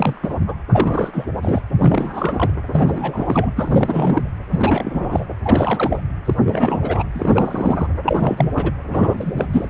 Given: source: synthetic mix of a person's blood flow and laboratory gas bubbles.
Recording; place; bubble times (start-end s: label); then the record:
Doppler ultrasound of blood flow; precordium
0.00-0.19 s: bubbles
0.23-0.35 s: bubbles
0.46-0.55 s: bubbles
0.67-1.25 s: bubbles
1.42-1.60 s: bubbles
1.77-2.50 s: bubbles
2.72-3.51 s: bubbles
3.56-4.30 s: bubbles
4.51-5.25 s: bubbles
5.43-6.02 s: bubbles
6.25-6.34 s: bubbles
6.46-7.04 s: bubbles
7.14-7.87 s: bubbles
8.06-8.71 s: bubbles
8.91-9.33 s: bubbles
9.36-9.46 s: bubbles
9.53-9.68 s: bubbles
From the record:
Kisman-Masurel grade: 342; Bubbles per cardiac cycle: rolling drumbeat, 9 or more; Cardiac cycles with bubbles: 100%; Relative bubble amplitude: moderate (0.250 to 0.450); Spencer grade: 3 (all of the cardiac periods contain showers or single bubble signals, but not dominating or overriding the cardiac motion signals); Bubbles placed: anywhere in the cardiac cycle